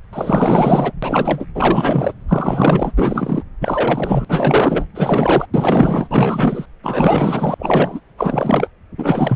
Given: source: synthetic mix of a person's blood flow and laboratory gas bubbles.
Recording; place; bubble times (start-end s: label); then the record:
Doppler ultrasound of blood flow; subclavian vein
0.12-0.92 s: bubbles
1.02-1.46 s: bubbles
1.54-2.13 s: bubbles
2.28-2.92 s: bubbles
2.97-3.44 s: bubbles
3.60-4.25 s: bubbles
4.28-4.85 s: bubbles
4.94-5.46 s: bubbles
5.53-6.65 s: bubbles
6.83-7.54 s: bubbles
7.58-8.00 s: bubbles
8.17-8.70 s: bubbles
8.98-9.36 s: bubbles
From the record:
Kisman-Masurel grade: 444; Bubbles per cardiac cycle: continuous sound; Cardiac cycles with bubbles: 100%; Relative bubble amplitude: maximal (0.775 to 0.999); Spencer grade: 4 (maximum detectable bubble signal sounding continuously throughout systole and diastole of every cardiac period, and overriding the amplitude of the normal cardiac signals); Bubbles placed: anywhere in the cardiac cycle